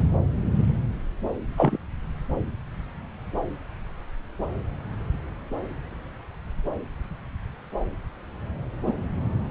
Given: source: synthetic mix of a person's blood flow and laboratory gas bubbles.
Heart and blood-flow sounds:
Doppler ultrasound of blood flow; subclavian vein
1.57-1.77 s: bubbles
8.86-8.93 s: bubbles
From the record:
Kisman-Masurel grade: 122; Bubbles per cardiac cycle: 1 to 2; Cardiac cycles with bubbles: 10 to 50%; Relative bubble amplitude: moderate (0.250 to 0.450); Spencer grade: 2 (many but less than half of the cardiac periods contain bubble signals, singularly or in groups); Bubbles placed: anywhere in the cardiac cycle

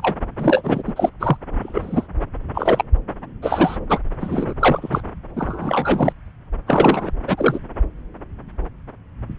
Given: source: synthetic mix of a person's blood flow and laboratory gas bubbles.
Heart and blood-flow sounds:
Doppler ultrasound of blood flow; subclavian vein
0.00-0.16 s: bubbles
0.40-0.82 s: bubbles
0.86-1.10 s: bubbles
1.19-1.37 s: bubbles
1.62-2.07 s: bubbles
2.54-2.84 s: bubbles
3.42-3.78 s: bubbles
3.89-3.99 s: bubbles
4.20-4.54 s: bubbles
4.59-5.03 s: bubbles
5.36-6.12 s: bubbles
6.67-7.11 s: bubbles
7.28-7.59 s: bubbles
From the record:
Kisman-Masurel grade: 233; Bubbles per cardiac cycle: several, 3 to 8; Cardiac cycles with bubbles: 50 to 99%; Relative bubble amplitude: loud (0.450 to 0.775); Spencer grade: 3 (all of the cardiac periods contain showers or single bubble signals, but not dominating or overriding the cardiac motion signals); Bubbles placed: anywhere in the cardiac cycle

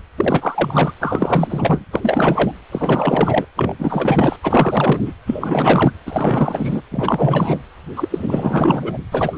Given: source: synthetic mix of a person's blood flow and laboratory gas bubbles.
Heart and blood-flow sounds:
Doppler ultrasound of blood flow; precordium
0.17-0.94 s: bubbles
1.00-1.85 s: bubbles
1.91-2.52 s: bubbles
2.71-3.45 s: bubbles
3.56-3.75 s: bubbles
3.79-4.36 s: bubbles
4.42-5.01 s: bubbles
5.05-5.14 s: bubbles
5.26-5.92 s: bubbles
6.06-6.82 s: bubbles
6.91-7.58 s: bubbles
7.96-8.98 s: bubbles
9.12-9.38 s: bubbles
From the record:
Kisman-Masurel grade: 444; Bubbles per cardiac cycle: continuous sound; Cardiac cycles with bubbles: 100%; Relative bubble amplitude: maximal (0.775 to 0.999); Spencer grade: 4 (maximum detectable bubble signal sounding continuously throughout systole and diastole of every cardiac period, and overriding the amplitude of the normal cardiac signals); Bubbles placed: anywhere in the cardiac cycle

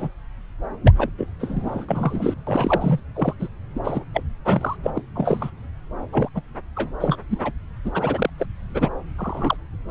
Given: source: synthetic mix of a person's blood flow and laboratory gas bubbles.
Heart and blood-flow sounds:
Doppler ultrasound of blood flow; subclavian vein
0.00-0.09 s: bubbles
0.85-0.92 s: bubbles
0.97-1.09 s: bubbles
1.17-1.26 s: bubbles
1.39-1.85 s: bubbles
1.89-2.35 s: bubbles
2.46-3.00 s: bubbles
3.15-3.34 s: bubbles
3.39-3.48 s: bubbles
3.75-3.80 s: bubbles
3.83-4.04 s: bubbles
4.13-4.22 s: bubbles
4.45-4.76 s: bubbles
4.83-4.91 s: bubbles
4.95-5.01 s: bubbles
5.14-5.51 s: bubbles
6.12-6.29 s: bubbles
6.34-6.42 s: bubbles
6.75-6.90 s: bubbles
7.00-7.17 s: bubbles
7.29-7.39 s: bubbles
7.43-7.51 s: bubbles
7.84-8.29 s: bubbles
8.38-8.46 s: bubbles
8.74-8.89 s: bubbles
9.18-9.56 s: bubbles
9.88-9.91 s: bubbles
From the record:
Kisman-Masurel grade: 242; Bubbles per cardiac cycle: several, 3 to 8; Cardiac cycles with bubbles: 100%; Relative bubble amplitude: moderate (0.250 to 0.450); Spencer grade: 3 (all of the cardiac periods contain showers or single bubble signals, but not dominating or overriding the cardiac motion signals); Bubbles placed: anywhere in the cardiac cycle

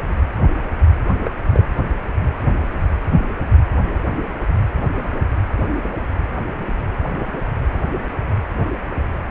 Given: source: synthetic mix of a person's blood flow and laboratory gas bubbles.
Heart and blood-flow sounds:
Doppler ultrasound of blood flow; precordium
1.25-1.30 s: bubbles
1.53-1.64 s: bubbles
From the record:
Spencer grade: 1 (occasional bubble signal discernible with the cardiac motion signal, with majority of cardiac periods free of bubbles); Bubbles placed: anywhere in the cardiac cycle

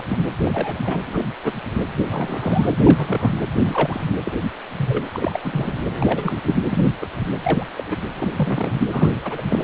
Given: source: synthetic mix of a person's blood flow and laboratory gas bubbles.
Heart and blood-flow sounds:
Doppler ultrasound of blood flow; precordium
0.00-0.04 s: bubbles
0.07-0.17 s: bubbles
0.45-0.97 s: bubbles
1.05-1.25 s: bubbles
1.44-1.53 s: bubbles
2.08-2.68 s: bubbles
2.83-3.35 s: bubbles
3.63-4.07 s: bubbles
4.25-4.32 s: bubbles
4.78-5.08 s: bubbles
5.12-5.39 s: bubbles
5.42-5.81 s: bubbles
5.91-6.42 s: bubbles
6.44-6.58 s: bubbles
6.69-6.85 s: bubbles
7.01-7.07 s: bubbles
7.43-7.66 s: bubbles
7.78-7.83 s: bubbles
7.87-7.96 s: bubbles
8.14-8.76 s: bubbles
8.90-9.41 s: bubbles
9.47-9.64 s: bubbles
From the record:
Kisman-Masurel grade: 242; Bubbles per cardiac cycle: several, 3 to 8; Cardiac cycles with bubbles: 100%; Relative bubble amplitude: moderate (0.250 to 0.450); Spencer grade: 3 (all of the cardiac periods contain showers or single bubble signals, but not dominating or overriding the cardiac motion signals); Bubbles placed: anywhere in the cardiac cycle

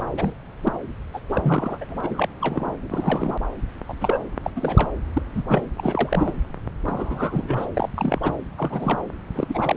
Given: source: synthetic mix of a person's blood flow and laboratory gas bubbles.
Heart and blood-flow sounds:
Doppler ultrasound of blood flow; subclavian vein
0.17-0.34 s: bubbles
0.63-0.72 s: bubbles
1.14-1.20 s: bubbles
1.29-1.78 s: bubbles
1.81-1.84 s: bubbles
1.90-2.27 s: bubbles
2.41-2.74 s: bubbles
2.90-3.34 s: bubbles
3.88-3.93 s: bubbles
4.00-4.18 s: bubbles
4.44-4.50 s: bubbles
4.55-4.91 s: bubbles
5.14-5.22 s: bubbles
5.33-5.42 s: bubbles
5.48-5.66 s: bubbles
5.77-6.33 s: bubbles
6.84-7.67 s: bubbles
7.74-7.89 s: bubbles
7.96-8.19 s: bubbles
8.22-8.35 s: bubbles
8.57-9.00 s: bubbles
9.35-9.75 s: bubbles
From the record:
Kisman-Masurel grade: 242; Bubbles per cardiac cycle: several, 3 to 8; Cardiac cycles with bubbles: 100%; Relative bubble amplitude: moderate (0.250 to 0.450); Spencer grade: 3 (all of the cardiac periods contain showers or single bubble signals, but not dominating or overriding the cardiac motion signals); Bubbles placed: anywhere in the cardiac cycle

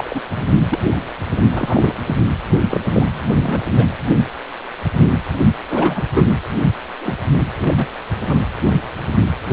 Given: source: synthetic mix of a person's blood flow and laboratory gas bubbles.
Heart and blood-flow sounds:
Doppler ultrasound of blood flow; precordium
0.00-0.20 s: bubbles
0.35-0.46 s: bubbles
0.68-0.79 s: bubbles
1.50-1.95 s: bubbles
2.05-2.15 s: bubbles
2.71-2.81 s: bubbles
2.94-3.26 s: bubbles
3.33-3.61 s: bubbles
3.77-3.86 s: bubbles
5.70-6.05 s: bubbles
6.15-6.28 s: bubbles
7.01-7.16 s: bubbles
7.54-7.88 s: bubbles
8.28-8.40 s: bubbles
From the record:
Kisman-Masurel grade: 232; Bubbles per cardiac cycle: several, 3 to 8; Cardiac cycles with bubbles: 50 to 99%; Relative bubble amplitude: moderate (0.250 to 0.450); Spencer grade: 3 (all of the cardiac periods contain showers or single bubble signals, but not dominating or overriding the cardiac motion signals); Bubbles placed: anywhere in the cardiac cycle

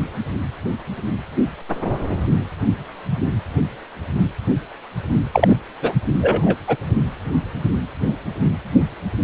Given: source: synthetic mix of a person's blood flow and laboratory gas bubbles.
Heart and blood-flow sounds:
Doppler ultrasound of blood flow; precordium
5.33-5.58 s: bubbles
5.81-5.94 s: bubbles
6.21-6.57 s: bubbles
6.67-6.77 s: bubbles
From the record:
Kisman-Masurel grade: 213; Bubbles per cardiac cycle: several, 3 to 8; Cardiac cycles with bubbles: 1 to 10%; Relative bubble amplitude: loud (0.450 to 0.775); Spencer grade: 1 (occasional bubble signal discernible with the cardiac motion signal, with majority of cardiac periods free of bubbles); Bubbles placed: anywhere in the cardiac cycle

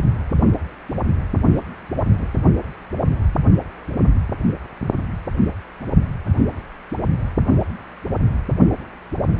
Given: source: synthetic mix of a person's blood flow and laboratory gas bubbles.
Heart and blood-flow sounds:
Doppler ultrasound of blood flow; precordium
1.53-1.58 s: bubbles
2.12-2.27 s: bubbles
From the record:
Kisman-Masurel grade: 121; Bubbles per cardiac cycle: 1 to 2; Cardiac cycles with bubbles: 10 to 50%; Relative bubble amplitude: barely perceptible (0.100 to 0.250); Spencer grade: 2 (many but less than half of the cardiac periods contain bubble signals, singularly or in groups); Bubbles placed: anywhere in the cardiac cycle

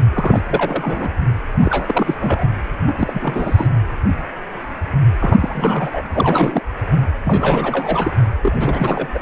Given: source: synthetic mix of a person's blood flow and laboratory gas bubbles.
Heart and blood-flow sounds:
Doppler ultrasound of blood flow; precordium
0.13-0.42 s: bubbles
0.49-1.09 s: bubbles
1.62-2.15 s: bubbles
2.20-2.56 s: bubbles
2.80-2.94 s: bubbles
2.98-3.68 s: bubbles
5.20-6.02 s: bubbles
6.14-6.62 s: bubbles
7.25-8.13 s: bubbles
8.42-9.08 s: bubbles
9.14-9.19 s: bubbles
From the record:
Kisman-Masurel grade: 332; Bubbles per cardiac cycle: rolling drumbeat, 9 or more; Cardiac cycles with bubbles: 50 to 99%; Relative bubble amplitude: moderate (0.250 to 0.450); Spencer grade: 3 (all of the cardiac periods contain showers or single bubble signals, but not dominating or overriding the cardiac motion signals); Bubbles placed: anywhere in the cardiac cycle

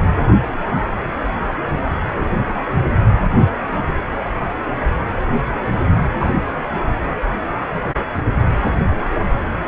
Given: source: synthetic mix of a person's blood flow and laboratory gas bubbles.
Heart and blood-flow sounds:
Doppler ultrasound of blood flow; precordium
6.20-6.33 s: bubbles
From the record:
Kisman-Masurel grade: 113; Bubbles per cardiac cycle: 1 to 2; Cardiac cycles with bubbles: 1 to 10%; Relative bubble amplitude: loud (0.450 to 0.775); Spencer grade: 1 (occasional bubble signal discernible with the cardiac motion signal, with majority of cardiac periods free of bubbles); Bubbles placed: anywhere in the cardiac cycle

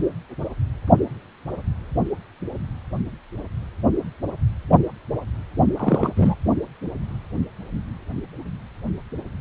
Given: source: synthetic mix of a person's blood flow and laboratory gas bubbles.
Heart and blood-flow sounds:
Doppler ultrasound of blood flow; precordium
5.77-6.12 s: bubbles
6.16-6.35 s: bubbles
From the record:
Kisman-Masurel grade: 213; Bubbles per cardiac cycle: several, 3 to 8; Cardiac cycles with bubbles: 1 to 10%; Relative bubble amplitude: loud (0.450 to 0.775); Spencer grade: 1 (occasional bubble signal discernible with the cardiac motion signal, with majority of cardiac periods free of bubbles); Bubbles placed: only in the low amplitude regions of the cardiac cycle

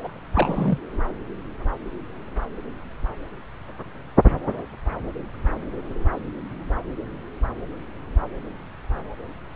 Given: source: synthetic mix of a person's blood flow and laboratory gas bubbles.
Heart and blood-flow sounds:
Doppler ultrasound of blood flow; subclavian vein
0.04-0.08 s: bubbles
0.33-0.78 s: bubbles
From the record:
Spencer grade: 1 (occasional bubble signal discernible with the cardiac motion signal, with majority of cardiac periods free of bubbles); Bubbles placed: anywhere in the cardiac cycle

